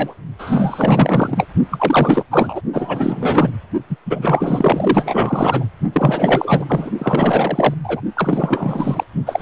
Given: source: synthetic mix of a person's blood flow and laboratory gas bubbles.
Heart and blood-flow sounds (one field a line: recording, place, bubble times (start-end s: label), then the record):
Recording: Doppler ultrasound of blood flow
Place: precordium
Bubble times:
0.00-0.15 s: bubbles
0.39-1.46 s: bubbles
1.71-2.23 s: bubbles
2.31-2.62 s: bubbles
2.73-3.52 s: bubbles
3.90-3.98 s: bubbles
4.05-5.65 s: bubbles
5.92-6.64 s: bubbles
6.68-6.91 s: bubbles
6.98-7.74 s: bubbles
7.83-8.01 s: bubbles
8.16-9.04 s: bubbles
9.26-9.41 s: bubbles
From the record:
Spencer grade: 4 (maximum detectable bubble signal sounding continuously throughout systole and diastole of every cardiac period, and overriding the amplitude of the normal cardiac signals)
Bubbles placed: only in the low amplitude regions of the cardiac cycle